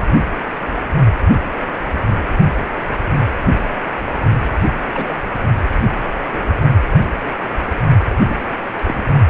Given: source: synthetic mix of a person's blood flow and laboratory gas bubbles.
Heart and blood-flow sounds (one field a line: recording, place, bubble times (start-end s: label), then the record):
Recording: Doppler ultrasound of blood flow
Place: precordium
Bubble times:
4.93-5.14 s: bubbles
6.31-6.48 s: bubbles
8.28-8.44 s: bubbles
8.86-9.00 s: bubbles
From the record:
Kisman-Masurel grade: 122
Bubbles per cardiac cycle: 1 to 2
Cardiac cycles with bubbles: 10 to 50%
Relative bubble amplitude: moderate (0.250 to 0.450)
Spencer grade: 2 (many but less than half of the cardiac periods contain bubble signals, singularly or in groups)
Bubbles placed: only in the low amplitude regions of the cardiac cycle